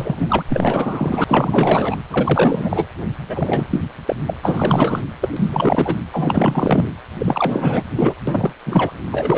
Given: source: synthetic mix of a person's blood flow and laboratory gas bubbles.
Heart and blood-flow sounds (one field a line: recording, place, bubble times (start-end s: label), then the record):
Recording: Doppler ultrasound of blood flow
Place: precordium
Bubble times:
0.00-0.44 s: bubbles
0.49-1.24 s: bubbles
1.27-1.96 s: bubbles
2.10-2.86 s: bubbles
3.28-3.81 s: bubbles
4.07-4.16 s: bubbles
4.27-4.34 s: bubbles
4.42-5.02 s: bubbles
5.21-5.32 s: bubbles
5.36-5.96 s: bubbles
6.12-6.91 s: bubbles
7.19-7.85 s: bubbles
7.96-8.14 s: bubbles
8.27-8.54 s: bubbles
8.66-8.92 s: bubbles
9.12-9.38 s: bubbles
From the record:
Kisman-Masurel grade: 444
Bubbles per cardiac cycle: continuous sound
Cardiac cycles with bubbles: 100%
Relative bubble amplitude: maximal (0.775 to 0.999)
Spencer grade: 4 (maximum detectable bubble signal sounding continuously throughout systole and diastole of every cardiac period, and overriding the amplitude of the normal cardiac signals)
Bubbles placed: anywhere in the cardiac cycle